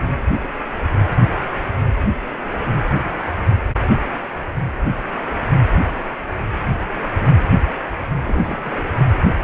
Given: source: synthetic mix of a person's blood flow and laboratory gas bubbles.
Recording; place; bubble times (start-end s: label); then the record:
Doppler ultrasound of blood flow; precordium
8.25-8.77 s: bubbles
From the record:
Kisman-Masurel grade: 211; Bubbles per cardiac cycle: several, 3 to 8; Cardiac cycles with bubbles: 1 to 10%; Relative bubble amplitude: barely perceptible (0.100 to 0.250); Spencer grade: 1 (occasional bubble signal discernible with the cardiac motion signal, with majority of cardiac periods free of bubbles); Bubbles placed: anywhere in the cardiac cycle